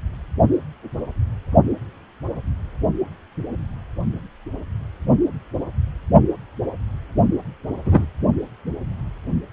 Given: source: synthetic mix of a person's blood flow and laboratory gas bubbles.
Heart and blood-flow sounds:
Doppler ultrasound of blood flow; precordium
7.84-8.05 s: bubbles
From the record:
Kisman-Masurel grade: 113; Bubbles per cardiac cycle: 1 to 2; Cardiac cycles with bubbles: 1 to 10%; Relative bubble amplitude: loud (0.450 to 0.775); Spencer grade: 1 (occasional bubble signal discernible with the cardiac motion signal, with majority of cardiac periods free of bubbles); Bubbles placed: only in the low amplitude regions of the cardiac cycle

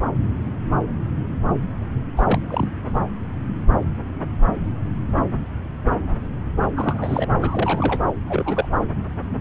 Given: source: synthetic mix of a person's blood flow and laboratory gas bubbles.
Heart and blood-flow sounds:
Doppler ultrasound of blood flow; subclavian vein
2.16-2.23 s: bubbles
2.26-2.38 s: bubbles
2.48-2.69 s: bubbles
6.75-7.29 s: bubbles
7.41-7.99 s: bubbles
8.27-8.66 s: bubbles
From the record:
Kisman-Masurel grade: 221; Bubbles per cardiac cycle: several, 3 to 8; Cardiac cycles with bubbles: 10 to 50%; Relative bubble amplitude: barely perceptible (0.100 to 0.250); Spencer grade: 2 (many but less than half of the cardiac periods contain bubble signals, singularly or in groups); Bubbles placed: anywhere in the cardiac cycle

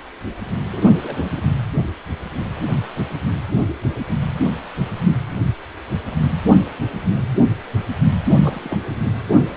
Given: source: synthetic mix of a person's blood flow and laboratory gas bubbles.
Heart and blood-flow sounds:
Doppler ultrasound of blood flow; precordium
0.71-0.81 s: bubbles
1.02-1.41 s: bubbles
8.24-8.79 s: bubbles
From the record:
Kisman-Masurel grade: 221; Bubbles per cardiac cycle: several, 3 to 8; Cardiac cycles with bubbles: 10 to 50%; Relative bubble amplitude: barely perceptible (0.100 to 0.250); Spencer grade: 2 (many but less than half of the cardiac periods contain bubble signals, singularly or in groups); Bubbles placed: anywhere in the cardiac cycle

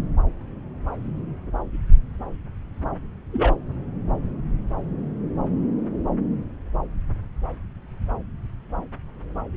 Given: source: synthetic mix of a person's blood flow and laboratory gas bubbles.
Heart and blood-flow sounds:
Doppler ultrasound of blood flow; subclavian vein
3.32-3.55 s: bubbles
From the record:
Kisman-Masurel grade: 112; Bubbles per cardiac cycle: 1 to 2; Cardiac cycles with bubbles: 1 to 10%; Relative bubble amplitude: moderate (0.250 to 0.450); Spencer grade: 1 (occasional bubble signal discernible with the cardiac motion signal, with majority of cardiac periods free of bubbles); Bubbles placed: anywhere in the cardiac cycle

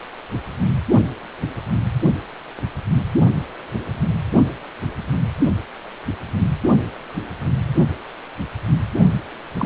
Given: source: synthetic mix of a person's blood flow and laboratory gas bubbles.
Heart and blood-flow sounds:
Doppler ultrasound of blood flow; precordium
9.59-9.66 s: bubbles
From the record:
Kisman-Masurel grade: 212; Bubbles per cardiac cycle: several, 3 to 8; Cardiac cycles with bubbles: 1 to 10%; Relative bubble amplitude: moderate (0.250 to 0.450); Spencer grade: 1 (occasional bubble signal discernible with the cardiac motion signal, with majority of cardiac periods free of bubbles); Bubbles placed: only in the low amplitude regions of the cardiac cycle

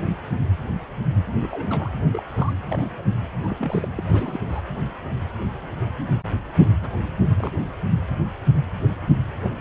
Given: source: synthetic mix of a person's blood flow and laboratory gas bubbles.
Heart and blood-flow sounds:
Doppler ultrasound of blood flow; precordium
1.26-1.90 s: bubbles
2.12-2.23 s: bubbles
2.34-2.53 s: bubbles
2.68-2.96 s: bubbles
2.98-3.04 s: bubbles
3.40-3.56 s: bubbles
3.59-3.89 s: bubbles
3.96-4.04 s: bubbles
4.08-4.39 s: bubbles
4.49-4.60 s: bubbles
6.81-6.90 s: bubbles
7.38-7.51 s: bubbles
From the record:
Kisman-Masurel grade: 221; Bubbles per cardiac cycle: several, 3 to 8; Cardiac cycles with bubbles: 10 to 50%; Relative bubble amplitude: barely perceptible (0.100 to 0.250); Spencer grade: 2 (many but less than half of the cardiac periods contain bubble signals, singularly or in groups); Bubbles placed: anywhere in the cardiac cycle

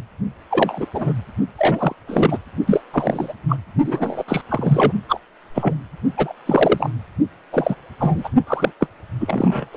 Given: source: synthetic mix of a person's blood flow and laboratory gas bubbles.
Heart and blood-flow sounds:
Doppler ultrasound of blood flow; precordium
0.50-0.85 s: bubbles
0.93-1.12 s: bubbles
1.58-1.95 s: bubbles
2.07-2.38 s: bubbles
2.67-2.81 s: bubbles
2.93-3.33 s: bubbles
3.48-3.56 s: bubbles
3.84-4.23 s: bubbles
4.28-4.42 s: bubbles
4.49-4.92 s: bubbles
5.08-5.20 s: bubbles
5.54-5.74 s: bubbles
6.17-6.33 s: bubbles
6.46-6.90 s: bubbles
7.52-7.75 s: bubbles
7.99-8.29 s: bubbles
8.47-8.73 s: bubbles
8.80-8.87 s: bubbles
9.20-9.66 s: bubbles
9.73-9.77 s: bubbles
From the record:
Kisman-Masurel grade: 233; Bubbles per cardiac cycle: several, 3 to 8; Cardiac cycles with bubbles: 50 to 99%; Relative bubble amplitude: loud (0.450 to 0.775); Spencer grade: 3 (all of the cardiac periods contain showers or single bubble signals, but not dominating or overriding the cardiac motion signals); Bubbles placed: only in the low amplitude regions of the cardiac cycle

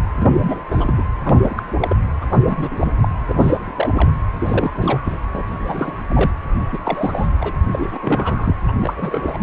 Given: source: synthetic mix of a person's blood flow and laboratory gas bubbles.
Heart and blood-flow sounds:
Doppler ultrasound of blood flow; precordium
0.20-0.34 s: bubbles
0.37-0.60 s: bubbles
0.71-0.94 s: bubbles
0.97-1.04 s: bubbles
1.21-1.62 s: bubbles
1.81-1.97 s: bubbles
2.21-2.26 s: bubbles
2.29-2.39 s: bubbles
2.46-2.93 s: bubbles
3.01-3.08 s: bubbles
3.28-3.57 s: bubbles
3.67-3.73 s: bubbles
3.76-3.90 s: bubbles
3.95-4.13 s: bubbles
4.38-5.17 s: bubbles
5.33-5.44 s: bubbles
5.47-5.97 s: bubbles
6.03-6.30 s: bubbles
6.59-6.64 s: bubbles
6.72-6.78 s: bubbles
6.83-7.28 s: bubbles
7.40-7.53 s: bubbles
7.71-7.98 s: bubbles
8.02-8.55 s: bubbles
8.68-8.71 s: bubbles
8.80-8.94 s: bubbles
8.96-9.38 s: bubbles
From the record:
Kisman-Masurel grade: 342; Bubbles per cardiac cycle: rolling drumbeat, 9 or more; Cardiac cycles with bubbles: 100%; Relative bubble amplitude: moderate (0.250 to 0.450); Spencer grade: 3 (all of the cardiac periods contain showers or single bubble signals, but not dominating or overriding the cardiac motion signals); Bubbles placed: anywhere in the cardiac cycle

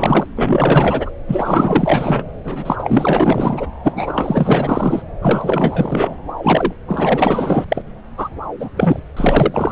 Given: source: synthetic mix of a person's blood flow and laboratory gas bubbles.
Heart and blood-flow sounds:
Doppler ultrasound of blood flow; subclavian vein
0.00-0.27 s: bubbles
0.36-1.10 s: bubbles
1.27-2.23 s: bubbles
2.44-2.76 s: bubbles
2.79-3.67 s: bubbles
3.83-5.02 s: bubbles
5.21-6.17 s: bubbles
6.43-6.74 s: bubbles
6.88-7.65 s: bubbles
7.68-7.82 s: bubbles
8.17-8.29 s: bubbles
8.60-8.70 s: bubbles
8.77-9.00 s: bubbles
9.17-9.72 s: bubbles
From the record:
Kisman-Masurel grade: 444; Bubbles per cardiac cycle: continuous sound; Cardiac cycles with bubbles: 100%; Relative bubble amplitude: maximal (0.775 to 0.999); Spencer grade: 4 (maximum detectable bubble signal sounding continuously throughout systole and diastole of every cardiac period, and overriding the amplitude of the normal cardiac signals); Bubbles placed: anywhere in the cardiac cycle

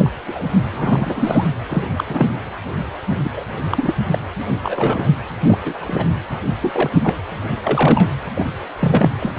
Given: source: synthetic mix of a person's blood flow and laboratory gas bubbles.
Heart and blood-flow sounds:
Doppler ultrasound of blood flow; precordium
0.00-0.10 s: bubbles
0.27-0.45 s: bubbles
0.72-1.47 s: bubbles
1.69-1.85 s: bubbles
1.97-2.34 s: bubbles
3.25-3.29 s: bubbles
3.36-3.45 s: bubbles
3.71-3.95 s: bubbles
4.10-4.18 s: bubbles
4.63-5.17 s: bubbles
5.46-5.58 s: bubbles
5.65-5.78 s: bubbles
5.81-6.08 s: bubbles
6.62-6.89 s: bubbles
7.02-7.14 s: bubbles
7.63-8.15 s: bubbles
8.35-8.47 s: bubbles
8.79-9.10 s: bubbles
9.19-9.32 s: bubbles
From the record:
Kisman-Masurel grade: 242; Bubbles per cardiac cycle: several, 3 to 8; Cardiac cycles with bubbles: 100%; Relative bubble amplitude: moderate (0.250 to 0.450); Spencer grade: 3 (all of the cardiac periods contain showers or single bubble signals, but not dominating or overriding the cardiac motion signals); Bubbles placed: anywhere in the cardiac cycle

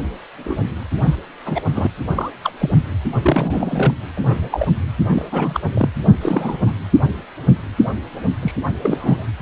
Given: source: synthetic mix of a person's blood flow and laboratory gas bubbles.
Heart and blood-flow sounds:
Doppler ultrasound of blood flow; precordium
0.44-0.60 s: bubbles
1.01-1.16 s: bubbles
1.46-1.62 s: bubbles
1.73-1.87 s: bubbles
2.16-2.31 s: bubbles
2.43-2.52 s: bubbles
2.59-2.77 s: bubbles
3.22-3.94 s: bubbles
4.16-4.49 s: bubbles
4.51-4.68 s: bubbles
5.12-5.25 s: bubbles
5.32-5.61 s: bubbles
5.74-5.89 s: bubbles
6.21-6.57 s: bubbles
6.66-6.75 s: bubbles
8.42-8.54 s: bubbles
8.83-9.25 s: bubbles
From the record:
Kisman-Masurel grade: 232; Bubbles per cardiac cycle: several, 3 to 8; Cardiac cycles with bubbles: 50 to 99%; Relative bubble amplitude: moderate (0.250 to 0.450); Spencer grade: 3 (all of the cardiac periods contain showers or single bubble signals, but not dominating or overriding the cardiac motion signals); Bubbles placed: anywhere in the cardiac cycle

